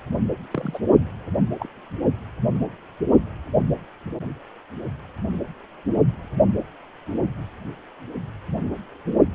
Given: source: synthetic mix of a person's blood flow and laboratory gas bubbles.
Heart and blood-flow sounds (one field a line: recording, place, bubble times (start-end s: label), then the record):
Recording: Doppler ultrasound of blood flow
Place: precordium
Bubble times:
0.51-0.78 s: bubbles
1.59-1.69 s: bubbles
From the record:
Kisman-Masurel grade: 121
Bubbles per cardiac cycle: 1 to 2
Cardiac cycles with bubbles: 10 to 50%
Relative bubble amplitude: barely perceptible (0.100 to 0.250)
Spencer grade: 2 (many but less than half of the cardiac periods contain bubble signals, singularly or in groups)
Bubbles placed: only in the low amplitude regions of the cardiac cycle